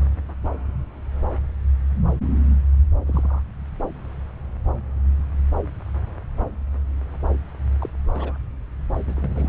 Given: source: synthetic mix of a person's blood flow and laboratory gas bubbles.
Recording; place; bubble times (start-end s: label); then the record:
Doppler ultrasound of blood flow; subclavian vein
3.06-3.42 s: bubbles
7.79-7.89 s: bubbles
8.07-8.38 s: bubbles
9.07-9.49 s: bubbles
From the record:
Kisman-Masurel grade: 221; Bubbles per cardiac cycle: several, 3 to 8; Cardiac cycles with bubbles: 10 to 50%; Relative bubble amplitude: barely perceptible (0.100 to 0.250); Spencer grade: 2 (many but less than half of the cardiac periods contain bubble signals, singularly or in groups); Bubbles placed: anywhere in the cardiac cycle